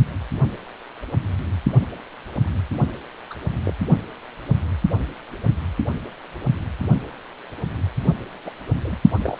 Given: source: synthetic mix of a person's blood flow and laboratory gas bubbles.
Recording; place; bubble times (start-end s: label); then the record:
Doppler ultrasound of blood flow; precordium
3.30-3.34 s: bubbles
3.65-3.73 s: bubbles
8.45-8.50 s: bubbles
8.84-8.96 s: bubbles
9.22-9.37 s: bubbles
From the record:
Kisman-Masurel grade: 121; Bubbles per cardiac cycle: 1 to 2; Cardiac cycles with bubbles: 10 to 50%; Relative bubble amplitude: barely perceptible (0.100 to 0.250); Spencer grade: 2 (many but less than half of the cardiac periods contain bubble signals, singularly or in groups); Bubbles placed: only in the low amplitude regions of the cardiac cycle